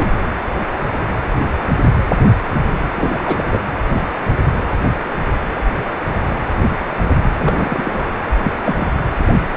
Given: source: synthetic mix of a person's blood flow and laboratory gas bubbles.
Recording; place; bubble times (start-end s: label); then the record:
Doppler ultrasound of blood flow; precordium
0.00-0.08 s: bubbles
0.99-1.05 s: bubbles
2.96-3.44 s: bubbles
3.50-3.60 s: bubbles
7.38-8.05 s: bubbles
8.42-8.52 s: bubbles
8.65-8.74 s: bubbles
8.77-8.92 s: bubbles
From the record:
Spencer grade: 2 (many but less than half of the cardiac periods contain bubble signals, singularly or in groups); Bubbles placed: anywhere in the cardiac cycle